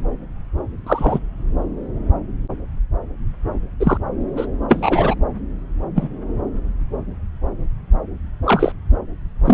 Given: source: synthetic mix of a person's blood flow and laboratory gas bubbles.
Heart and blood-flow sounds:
Doppler ultrasound of blood flow; subclavian vein
0.86-1.19 s: bubbles
3.79-3.98 s: bubbles
4.37-4.46 s: bubbles
4.69-5.15 s: bubbles
5.95-6.08 s: bubbles
8.45-8.72 s: bubbles
9.45-9.54 s: bubbles
From the record:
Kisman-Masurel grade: 123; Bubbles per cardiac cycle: 1 to 2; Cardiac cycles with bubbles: 10 to 50%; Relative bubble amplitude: loud (0.450 to 0.775); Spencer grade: 2 (many but less than half of the cardiac periods contain bubble signals, singularly or in groups); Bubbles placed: anywhere in the cardiac cycle

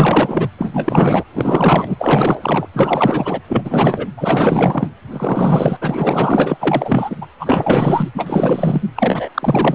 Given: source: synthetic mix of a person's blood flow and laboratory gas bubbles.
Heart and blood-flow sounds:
Doppler ultrasound of blood flow; precordium
0.00-0.49 s: bubbles
0.58-1.23 s: bubbles
1.33-1.96 s: bubbles
1.98-2.67 s: bubbles
2.73-3.40 s: bubbles
3.48-4.09 s: bubbles
4.17-4.88 s: bubbles
5.12-5.77 s: bubbles
5.81-7.17 s: bubbles
7.21-7.26 s: bubbles
7.38-8.10 s: bubbles
8.15-8.82 s: bubbles
8.96-9.29 s: bubbles
9.34-9.75 s: bubbles
From the record:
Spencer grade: 4 (maximum detectable bubble signal sounding continuously throughout systole and diastole of every cardiac period, and overriding the amplitude of the normal cardiac signals); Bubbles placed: anywhere in the cardiac cycle

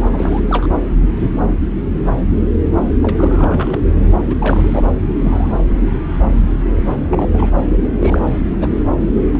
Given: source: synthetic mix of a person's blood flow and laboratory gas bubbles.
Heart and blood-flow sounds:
Doppler ultrasound of blood flow; subclavian vein
0.00-0.08 s: bubbles
0.12-0.41 s: bubbles
0.49-0.66 s: bubbles
3.02-3.88 s: bubbles
4.30-4.34 s: bubbles
4.39-4.94 s: bubbles
5.19-5.53 s: bubbles
7.10-7.52 s: bubbles
7.83-7.88 s: bubbles
8.01-8.29 s: bubbles
8.39-8.69 s: bubbles
9.06-9.11 s: bubbles
9.33-9.40 s: bubbles
From the record:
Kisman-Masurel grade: 332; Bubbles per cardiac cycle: rolling drumbeat, 9 or more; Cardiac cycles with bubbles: 50 to 99%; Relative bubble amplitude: moderate (0.250 to 0.450); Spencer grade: 3 (all of the cardiac periods contain showers or single bubble signals, but not dominating or overriding the cardiac motion signals); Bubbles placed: anywhere in the cardiac cycle

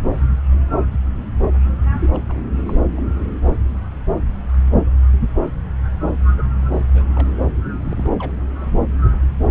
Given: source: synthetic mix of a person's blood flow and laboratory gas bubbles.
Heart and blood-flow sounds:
Doppler ultrasound of blood flow; subclavian vein
2.00-2.21 s: bubbles
2.28-2.43 s: bubbles
2.65-2.75 s: bubbles
2.96-3.00 s: bubbles
6.38-6.42 s: bubbles
6.72-6.85 s: bubbles
6.93-7.04 s: bubbles
7.15-7.28 s: bubbles
7.81-8.16 s: bubbles
8.19-8.32 s: bubbles
8.61-8.66 s: bubbles
From the record:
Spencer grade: 2 (many but less than half of the cardiac periods contain bubble signals, singularly or in groups); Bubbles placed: anywhere in the cardiac cycle

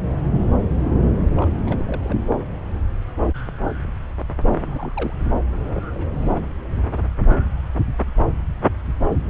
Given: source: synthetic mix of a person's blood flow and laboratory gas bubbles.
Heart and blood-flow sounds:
Doppler ultrasound of blood flow; subclavian vein
1.36-1.50 s: bubbles
1.66-2.21 s: bubbles
2.30-2.36 s: bubbles
4.45-5.13 s: bubbles
5.75-5.81 s: bubbles
5.91-6.32 s: bubbles
From the record:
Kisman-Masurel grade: 221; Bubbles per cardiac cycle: several, 3 to 8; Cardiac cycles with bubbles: 10 to 50%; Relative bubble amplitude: barely perceptible (0.100 to 0.250); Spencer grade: 2 (many but less than half of the cardiac periods contain bubble signals, singularly or in groups); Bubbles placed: anywhere in the cardiac cycle

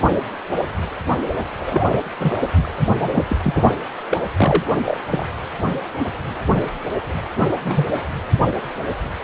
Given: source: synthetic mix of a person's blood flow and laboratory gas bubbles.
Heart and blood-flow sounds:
Doppler ultrasound of blood flow; precordium
1.57-2.02 s: bubbles
2.19-2.40 s: bubbles
2.62-2.73 s: bubbles
3.00-3.25 s: bubbles
3.29-3.36 s: bubbles
3.42-3.76 s: bubbles
4.11-4.18 s: bubbles
4.37-4.64 s: bubbles
4.85-5.01 s: bubbles
5.10-5.25 s: bubbles
7.64-7.86 s: bubbles
From the record:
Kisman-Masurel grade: 222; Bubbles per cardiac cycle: several, 3 to 8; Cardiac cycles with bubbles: 10 to 50%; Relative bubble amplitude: moderate (0.250 to 0.450); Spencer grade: 2 (many but less than half of the cardiac periods contain bubble signals, singularly or in groups); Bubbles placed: anywhere in the cardiac cycle

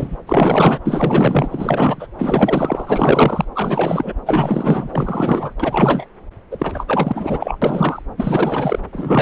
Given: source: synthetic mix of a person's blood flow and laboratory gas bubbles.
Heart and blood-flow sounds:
Doppler ultrasound of blood flow; subclavian vein
0.00-0.18 s: bubbles
0.27-0.78 s: bubbles
0.85-2.07 s: bubbles
2.18-3.45 s: bubbles
3.54-4.12 s: bubbles
4.25-4.89 s: bubbles
4.92-5.54 s: bubbles
5.60-6.07 s: bubbles
6.50-7.58 s: bubbles
7.62-8.02 s: bubbles
8.16-8.79 s: bubbles
8.92-9.22 s: bubbles
From the record:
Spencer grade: 4 (maximum detectable bubble signal sounding continuously throughout systole and diastole of every cardiac period, and overriding the amplitude of the normal cardiac signals); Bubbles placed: anywhere in the cardiac cycle

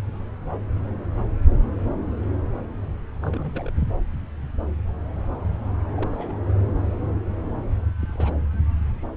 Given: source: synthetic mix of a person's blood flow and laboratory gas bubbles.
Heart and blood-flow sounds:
Doppler ultrasound of blood flow; subclavian vein
3.22-3.73 s: bubbles
3.76-3.83 s: bubbles
5.96-6.36 s: bubbles
6.45-6.50 s: bubbles
8.00-8.34 s: bubbles
From the record:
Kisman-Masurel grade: 221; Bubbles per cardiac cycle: several, 3 to 8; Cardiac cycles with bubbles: 10 to 50%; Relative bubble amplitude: barely perceptible (0.100 to 0.250); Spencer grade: 2 (many but less than half of the cardiac periods contain bubble signals, singularly or in groups); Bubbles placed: anywhere in the cardiac cycle

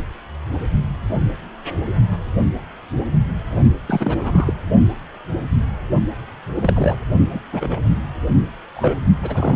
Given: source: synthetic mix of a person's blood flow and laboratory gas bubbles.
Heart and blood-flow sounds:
Doppler ultrasound of blood flow; precordium
3.86-4.53 s: bubbles
6.54-6.96 s: bubbles
7.30-7.40 s: bubbles
7.52-7.79 s: bubbles
8.76-8.99 s: bubbles
9.22-9.56 s: bubbles
From the record:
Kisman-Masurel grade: 232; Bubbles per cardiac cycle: several, 3 to 8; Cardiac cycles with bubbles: 50 to 99%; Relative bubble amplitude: moderate (0.250 to 0.450); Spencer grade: 3 (all of the cardiac periods contain showers or single bubble signals, but not dominating or overriding the cardiac motion signals); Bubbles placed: only in the low amplitude regions of the cardiac cycle

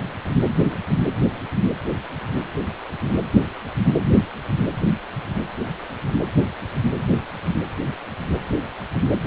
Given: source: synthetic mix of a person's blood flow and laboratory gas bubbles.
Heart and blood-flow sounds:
Doppler ultrasound of blood flow; precordium
no bubbles
From the record:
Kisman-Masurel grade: 000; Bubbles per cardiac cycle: 0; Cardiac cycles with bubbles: 0%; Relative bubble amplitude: no bubbles discernible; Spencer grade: 0 (complete lack of bubble signals)

